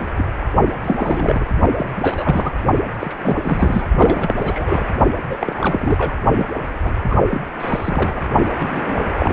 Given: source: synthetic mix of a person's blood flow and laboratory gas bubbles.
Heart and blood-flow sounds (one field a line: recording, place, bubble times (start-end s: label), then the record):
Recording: Doppler ultrasound of blood flow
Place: precordium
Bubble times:
0.00-0.05 s: bubbles
0.16-0.25 s: bubbles
0.82-1.46 s: bubbles
1.77-1.90 s: bubbles
1.95-2.51 s: bubbles
2.99-3.15 s: bubbles
3.22-3.37 s: bubbles
3.44-3.85 s: bubbles
3.98-4.93 s: bubbles
5.28-5.37 s: bubbles
5.41-6.18 s: bubbles
6.36-6.46 s: bubbles
6.84-6.95 s: bubbles
7.10-7.20 s: bubbles
7.31-7.42 s: bubbles
7.60-8.22 s: bubbles
8.58-9.05 s: bubbles
9.10-9.33 s: bubbles
From the record:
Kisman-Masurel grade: 342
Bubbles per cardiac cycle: rolling drumbeat, 9 or more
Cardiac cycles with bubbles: 100%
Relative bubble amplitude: moderate (0.250 to 0.450)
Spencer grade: 3 (all of the cardiac periods contain showers or single bubble signals, but not dominating or overriding the cardiac motion signals)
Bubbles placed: only in the low amplitude regions of the cardiac cycle